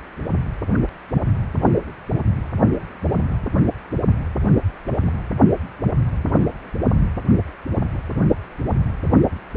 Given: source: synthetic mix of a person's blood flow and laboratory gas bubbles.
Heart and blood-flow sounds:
Doppler ultrasound of blood flow; precordium
4.87-5.13 s: bubbles
From the record:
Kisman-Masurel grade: 121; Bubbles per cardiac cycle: 1 to 2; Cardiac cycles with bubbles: 10 to 50%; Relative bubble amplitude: barely perceptible (0.100 to 0.250); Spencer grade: 2 (many but less than half of the cardiac periods contain bubble signals, singularly or in groups); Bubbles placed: anywhere in the cardiac cycle

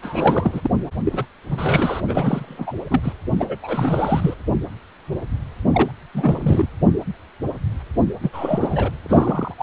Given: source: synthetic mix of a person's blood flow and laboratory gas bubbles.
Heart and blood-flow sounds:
Doppler ultrasound of blood flow; precordium
0.02-0.67 s: bubbles
1.04-1.26 s: bubbles
1.50-2.02 s: bubbles
2.07-2.73 s: bubbles
2.90-3.00 s: bubbles
3.02-3.13 s: bubbles
3.39-3.56 s: bubbles
3.62-4.34 s: bubbles
5.72-5.91 s: bubbles
6.13-6.68 s: bubbles
8.20-8.91 s: bubbles
9.03-9.54 s: bubbles
9.57-9.63 s: bubbles
From the record:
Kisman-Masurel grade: 332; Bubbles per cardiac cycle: rolling drumbeat, 9 or more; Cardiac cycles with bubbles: 50 to 99%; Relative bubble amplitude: moderate (0.250 to 0.450); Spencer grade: 3 (all of the cardiac periods contain showers or single bubble signals, but not dominating or overriding the cardiac motion signals); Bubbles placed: anywhere in the cardiac cycle

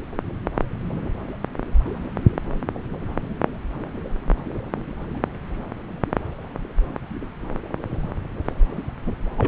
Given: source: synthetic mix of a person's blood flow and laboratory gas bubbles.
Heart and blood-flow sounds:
Doppler ultrasound of blood flow; subclavian vein
9.06-9.12 s: bubbles
9.38-9.48 s: bubbles
From the record:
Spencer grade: 1 (occasional bubble signal discernible with the cardiac motion signal, with majority of cardiac periods free of bubbles); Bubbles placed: anywhere in the cardiac cycle

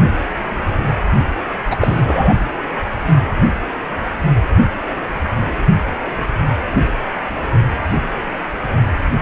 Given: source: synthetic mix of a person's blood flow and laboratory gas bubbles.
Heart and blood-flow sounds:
Doppler ultrasound of blood flow; precordium
1.71-1.76 s: bubbles
1.80-2.37 s: bubbles
From the record:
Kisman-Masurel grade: 213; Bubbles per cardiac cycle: several, 3 to 8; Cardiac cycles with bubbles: 1 to 10%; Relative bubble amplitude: loud (0.450 to 0.775); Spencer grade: 1 (occasional bubble signal discernible with the cardiac motion signal, with majority of cardiac periods free of bubbles); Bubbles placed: only in the low amplitude regions of the cardiac cycle

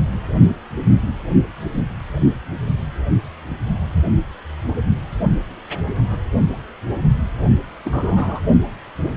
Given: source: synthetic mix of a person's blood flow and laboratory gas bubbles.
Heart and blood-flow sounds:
Doppler ultrasound of blood flow; precordium
7.84-8.41 s: bubbles
From the record:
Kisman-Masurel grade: 122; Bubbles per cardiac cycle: 1 to 2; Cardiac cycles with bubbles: 10 to 50%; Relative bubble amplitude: moderate (0.250 to 0.450); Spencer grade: 2 (many but less than half of the cardiac periods contain bubble signals, singularly or in groups); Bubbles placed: only in the low amplitude regions of the cardiac cycle

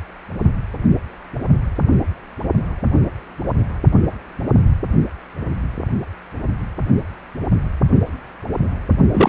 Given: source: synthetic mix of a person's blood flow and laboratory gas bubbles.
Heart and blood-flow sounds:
Doppler ultrasound of blood flow; precordium
9.12-9.29 s: bubbles
From the record:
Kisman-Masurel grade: 213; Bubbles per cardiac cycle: several, 3 to 8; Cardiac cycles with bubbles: 1 to 10%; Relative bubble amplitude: loud (0.450 to 0.775); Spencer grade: 1 (occasional bubble signal discernible with the cardiac motion signal, with majority of cardiac periods free of bubbles); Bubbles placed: only in the low amplitude regions of the cardiac cycle

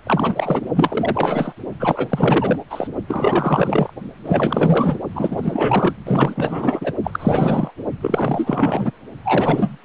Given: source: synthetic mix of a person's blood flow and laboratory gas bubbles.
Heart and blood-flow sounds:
Doppler ultrasound of blood flow; precordium
0.06-0.62 s: bubbles
0.74-1.53 s: bubbles
1.79-2.59 s: bubbles
2.69-2.88 s: bubbles
3.07-3.91 s: bubbles
4.25-5.00 s: bubbles
5.13-5.94 s: bubbles
6.05-6.93 s: bubbles
7.04-7.72 s: bubbles
8.02-8.91 s: bubbles
9.24-9.78 s: bubbles
From the record:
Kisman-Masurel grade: 444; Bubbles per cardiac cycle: continuous sound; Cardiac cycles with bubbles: 100%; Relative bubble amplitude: maximal (0.775 to 0.999); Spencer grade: 4 (maximum detectable bubble signal sounding continuously throughout systole and diastole of every cardiac period, and overriding the amplitude of the normal cardiac signals); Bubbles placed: only in the low amplitude regions of the cardiac cycle

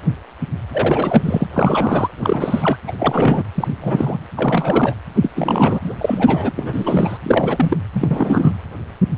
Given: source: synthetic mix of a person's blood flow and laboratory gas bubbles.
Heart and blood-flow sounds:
Doppler ultrasound of blood flow; precordium
0.73-1.47 s: bubbles
1.53-2.08 s: bubbles
2.17-2.77 s: bubbles
2.87-2.92 s: bubbles
2.99-3.42 s: bubbles
3.54-3.68 s: bubbles
3.80-4.17 s: bubbles
4.37-4.96 s: bubbles
5.15-5.30 s: bubbles
5.35-5.80 s: bubbles
5.83-5.93 s: bubbles
5.98-6.54 s: bubbles
6.56-7.17 s: bubbles
7.22-7.77 s: bubbles
7.92-8.58 s: bubbles
From the record:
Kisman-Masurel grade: 333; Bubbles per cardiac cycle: rolling drumbeat, 9 or more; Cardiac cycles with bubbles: 50 to 99%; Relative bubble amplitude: loud (0.450 to 0.775); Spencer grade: 3 (all of the cardiac periods contain showers or single bubble signals, but not dominating or overriding the cardiac motion signals); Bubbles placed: anywhere in the cardiac cycle

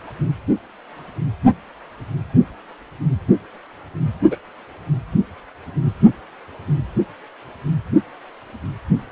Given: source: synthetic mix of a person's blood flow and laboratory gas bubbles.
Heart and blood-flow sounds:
Doppler ultrasound of blood flow; precordium
4.31-4.37 s: bubbles
From the record:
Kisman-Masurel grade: 112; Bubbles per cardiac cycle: 1 to 2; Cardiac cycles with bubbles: 1 to 10%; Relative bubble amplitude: moderate (0.250 to 0.450); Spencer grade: 1 (occasional bubble signal discernible with the cardiac motion signal, with majority of cardiac periods free of bubbles); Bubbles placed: only in the low amplitude regions of the cardiac cycle

